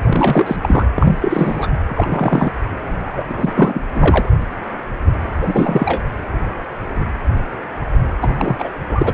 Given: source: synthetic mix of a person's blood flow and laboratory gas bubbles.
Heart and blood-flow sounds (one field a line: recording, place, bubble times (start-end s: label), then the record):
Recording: Doppler ultrasound of blood flow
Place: precordium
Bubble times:
0.06-0.56 s: bubbles
0.61-0.86 s: bubbles
0.95-1.16 s: bubbles
1.21-1.67 s: bubbles
1.88-2.52 s: bubbles
3.15-3.25 s: bubbles
3.29-3.82 s: bubbles
3.91-4.29 s: bubbles
5.41-6.01 s: bubbles
8.21-8.69 s: bubbles
8.87-9.14 s: bubbles
From the record:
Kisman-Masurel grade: 333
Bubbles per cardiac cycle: rolling drumbeat, 9 or more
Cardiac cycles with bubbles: 50 to 99%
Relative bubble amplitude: loud (0.450 to 0.775)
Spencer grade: 3 (all of the cardiac periods contain showers or single bubble signals, but not dominating or overriding the cardiac motion signals)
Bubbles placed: anywhere in the cardiac cycle